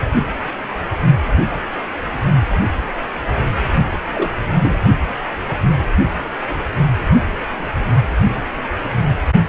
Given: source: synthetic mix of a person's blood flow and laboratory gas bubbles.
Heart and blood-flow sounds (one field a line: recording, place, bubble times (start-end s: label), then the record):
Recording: Doppler ultrasound of blood flow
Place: precordium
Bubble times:
4.14-4.30 s: bubbles
4.59-4.77 s: bubbles
From the record:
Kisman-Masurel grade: 112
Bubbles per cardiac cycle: 1 to 2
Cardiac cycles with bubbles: 1 to 10%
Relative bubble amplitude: moderate (0.250 to 0.450)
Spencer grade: 1 (occasional bubble signal discernible with the cardiac motion signal, with majority of cardiac periods free of bubbles)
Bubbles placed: only in the low amplitude regions of the cardiac cycle